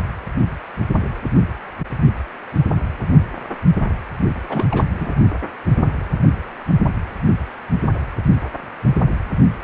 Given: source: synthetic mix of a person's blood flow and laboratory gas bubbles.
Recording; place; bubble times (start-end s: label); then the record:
Doppler ultrasound of blood flow; precordium
4.48-4.87 s: bubbles
4.91-5.15 s: bubbles
From the record:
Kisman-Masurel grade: 222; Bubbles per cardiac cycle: several, 3 to 8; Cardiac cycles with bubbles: 10 to 50%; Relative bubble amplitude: moderate (0.250 to 0.450); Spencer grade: 2 (many but less than half of the cardiac periods contain bubble signals, singularly or in groups); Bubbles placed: only in the low amplitude regions of the cardiac cycle